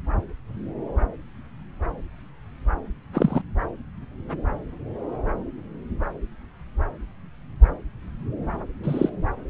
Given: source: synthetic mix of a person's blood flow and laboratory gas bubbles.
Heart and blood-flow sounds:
Doppler ultrasound of blood flow; subclavian vein
3.13-3.42 s: bubbles
8.83-9.10 s: bubbles
From the record:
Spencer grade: 2 (many but less than half of the cardiac periods contain bubble signals, singularly or in groups); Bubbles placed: anywhere in the cardiac cycle

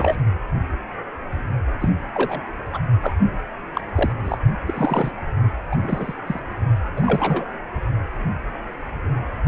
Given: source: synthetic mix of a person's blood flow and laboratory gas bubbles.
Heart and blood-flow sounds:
Doppler ultrasound of blood flow; precordium
0.00-0.22 s: bubbles
1.79-1.89 s: bubbles
2.14-2.42 s: bubbles
2.73-2.79 s: bubbles
3.02-3.13 s: bubbles
3.74-3.81 s: bubbles
3.95-4.12 s: bubbles
4.24-4.38 s: bubbles
4.66-5.12 s: bubbles
5.71-5.77 s: bubbles
5.82-6.14 s: bubbles
6.27-6.39 s: bubbles
6.96-7.45 s: bubbles
From the record:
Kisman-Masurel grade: 232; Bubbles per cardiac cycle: several, 3 to 8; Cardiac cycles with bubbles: 50 to 99%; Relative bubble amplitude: moderate (0.250 to 0.450); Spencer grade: 3 (all of the cardiac periods contain showers or single bubble signals, but not dominating or overriding the cardiac motion signals); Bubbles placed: only in the low amplitude regions of the cardiac cycle

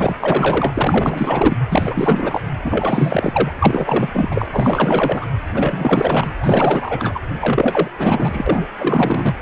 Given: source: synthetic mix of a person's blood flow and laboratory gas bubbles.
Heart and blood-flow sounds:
Doppler ultrasound of blood flow; precordium
0.00-0.16 s: bubbles
0.21-1.57 s: bubbles
1.70-2.41 s: bubbles
2.64-3.51 s: bubbles
3.59-4.47 s: bubbles
4.51-5.26 s: bubbles
5.54-6.30 s: bubbles
6.40-7.19 s: bubbles
7.39-7.88 s: bubbles
7.98-8.69 s: bubbles
8.75-9.35 s: bubbles
From the record:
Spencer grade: 4 (maximum detectable bubble signal sounding continuously throughout systole and diastole of every cardiac period, and overriding the amplitude of the normal cardiac signals); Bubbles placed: anywhere in the cardiac cycle

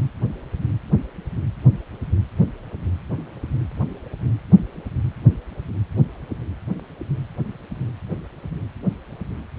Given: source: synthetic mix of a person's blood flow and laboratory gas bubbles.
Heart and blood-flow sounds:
Doppler ultrasound of blood flow; precordium
no bubbles
From the record:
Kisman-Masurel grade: 000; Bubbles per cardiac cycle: 0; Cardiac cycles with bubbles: 0%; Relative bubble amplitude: no bubbles discernible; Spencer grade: 0 (complete lack of bubble signals)

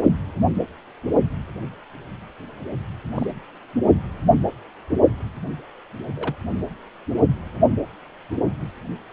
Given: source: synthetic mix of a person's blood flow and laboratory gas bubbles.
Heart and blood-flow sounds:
Doppler ultrasound of blood flow; precordium
3.15-3.26 s: bubbles
6.16-6.35 s: bubbles
From the record:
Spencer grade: 2 (many but less than half of the cardiac periods contain bubble signals, singularly or in groups); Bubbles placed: only in the low amplitude regions of the cardiac cycle

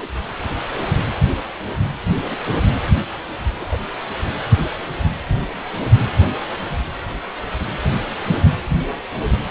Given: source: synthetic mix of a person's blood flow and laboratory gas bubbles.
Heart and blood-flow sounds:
Doppler ultrasound of blood flow; precordium
0.00-0.09 s: bubbles
0.55-0.62 s: bubbles
0.74-0.84 s: bubbles
3.48-3.66 s: bubbles
3.69-3.78 s: bubbles
From the record:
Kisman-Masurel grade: 121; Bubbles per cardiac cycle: 1 to 2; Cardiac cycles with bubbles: 10 to 50%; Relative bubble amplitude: barely perceptible (0.100 to 0.250); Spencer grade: 2 (many but less than half of the cardiac periods contain bubble signals, singularly or in groups); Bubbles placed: anywhere in the cardiac cycle

